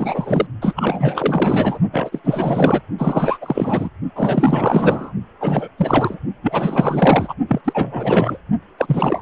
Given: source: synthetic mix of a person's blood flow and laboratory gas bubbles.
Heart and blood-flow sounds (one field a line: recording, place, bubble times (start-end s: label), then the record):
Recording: Doppler ultrasound of blood flow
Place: precordium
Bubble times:
0.00-0.47 s: bubbles
0.61-0.73 s: bubbles
0.75-1.79 s: bubbles
1.92-2.21 s: bubbles
2.24-2.81 s: bubbles
2.98-3.38 s: bubbles
3.41-3.91 s: bubbles
4.15-5.12 s: bubbles
5.40-5.69 s: bubbles
5.78-6.18 s: bubbles
6.42-7.34 s: bubbles
7.48-7.62 s: bubbles
7.64-8.38 s: bubbles
8.78-9.21 s: bubbles
From the record:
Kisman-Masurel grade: 444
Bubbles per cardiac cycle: continuous sound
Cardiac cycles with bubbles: 100%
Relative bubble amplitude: maximal (0.775 to 0.999)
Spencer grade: 4 (maximum detectable bubble signal sounding continuously throughout systole and diastole of every cardiac period, and overriding the amplitude of the normal cardiac signals)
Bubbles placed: only in the low amplitude regions of the cardiac cycle